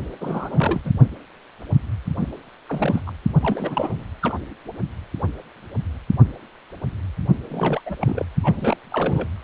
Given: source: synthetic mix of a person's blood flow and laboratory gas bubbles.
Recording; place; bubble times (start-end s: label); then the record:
Doppler ultrasound of blood flow; precordium
0.21-0.81 s: bubbles
0.84-0.92 s: bubbles
2.20-2.28 s: bubbles
2.68-3.01 s: bubbles
3.07-3.11 s: bubbles
3.42-4.04 s: bubbles
4.21-4.34 s: bubbles
7.49-7.81 s: bubbles
7.86-7.96 s: bubbles
8.01-8.25 s: bubbles
8.43-8.75 s: bubbles
8.91-9.28 s: bubbles
From the record:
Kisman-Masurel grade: 332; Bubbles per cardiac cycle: rolling drumbeat, 9 or more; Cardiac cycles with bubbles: 50 to 99%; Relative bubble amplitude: moderate (0.250 to 0.450); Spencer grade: 3 (all of the cardiac periods contain showers or single bubble signals, but not dominating or overriding the cardiac motion signals); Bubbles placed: only in the low amplitude regions of the cardiac cycle